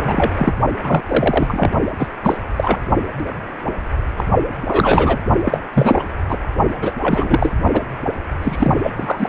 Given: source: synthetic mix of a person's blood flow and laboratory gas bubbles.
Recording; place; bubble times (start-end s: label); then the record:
Doppler ultrasound of blood flow; precordium
0.03-0.31 s: bubbles
0.36-0.54 s: bubbles
0.83-1.02 s: bubbles
1.07-1.72 s: bubbles
1.97-2.08 s: bubbles
2.23-2.38 s: bubbles
2.56-2.79 s: bubbles
4.17-4.25 s: bubbles
4.66-5.20 s: bubbles
5.45-5.60 s: bubbles
5.74-6.04 s: bubbles
6.28-6.38 s: bubbles
6.81-6.92 s: bubbles
7.02-7.53 s: bubbles
7.73-7.82 s: bubbles
8.42-8.74 s: bubbles
8.82-8.91 s: bubbles
8.96-9.28 s: bubbles
From the record:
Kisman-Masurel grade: 333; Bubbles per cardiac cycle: rolling drumbeat, 9 or more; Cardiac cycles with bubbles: 50 to 99%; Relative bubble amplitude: loud (0.450 to 0.775); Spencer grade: 3 (all of the cardiac periods contain showers or single bubble signals, but not dominating or overriding the cardiac motion signals); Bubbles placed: only in the low amplitude regions of the cardiac cycle